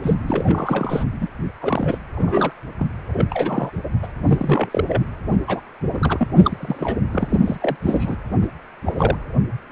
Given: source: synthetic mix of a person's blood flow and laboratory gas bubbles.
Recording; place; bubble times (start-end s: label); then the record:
Doppler ultrasound of blood flow; precordium
0.00-0.15 s: bubbles
0.27-1.04 s: bubbles
1.21-1.28 s: bubbles
1.61-1.98 s: bubbles
2.15-2.52 s: bubbles
2.79-2.86 s: bubbles
3.13-3.27 s: bubbles
3.29-3.71 s: bubbles
4.03-4.08 s: bubbles
4.27-4.85 s: bubbles
4.88-5.05 s: bubbles
5.47-5.61 s: bubbles
5.92-6.28 s: bubbles
6.36-6.98 s: bubbles
7.12-7.41 s: bubbles
7.44-7.57 s: bubbles
7.62-7.76 s: bubbles
7.82-8.16 s: bubbles
8.41-8.48 s: bubbles
8.85-8.92 s: bubbles
8.97-9.18 s: bubbles
9.70-9.72 s: bubbles
From the record:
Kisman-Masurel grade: 232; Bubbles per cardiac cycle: several, 3 to 8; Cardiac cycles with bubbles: 50 to 99%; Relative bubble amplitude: moderate (0.250 to 0.450); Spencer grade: 3 (all of the cardiac periods contain showers or single bubble signals, but not dominating or overriding the cardiac motion signals); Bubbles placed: anywhere in the cardiac cycle